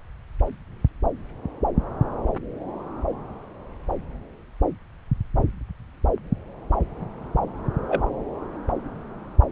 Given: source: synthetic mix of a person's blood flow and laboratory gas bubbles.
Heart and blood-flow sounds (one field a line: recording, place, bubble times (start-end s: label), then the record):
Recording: Doppler ultrasound of blood flow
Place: subclavian vein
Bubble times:
7.88-8.03 s: bubbles
From the record:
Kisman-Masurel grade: 122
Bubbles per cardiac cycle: 1 to 2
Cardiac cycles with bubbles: 10 to 50%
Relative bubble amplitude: moderate (0.250 to 0.450)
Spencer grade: 2 (many but less than half of the cardiac periods contain bubble signals, singularly or in groups)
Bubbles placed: anywhere in the cardiac cycle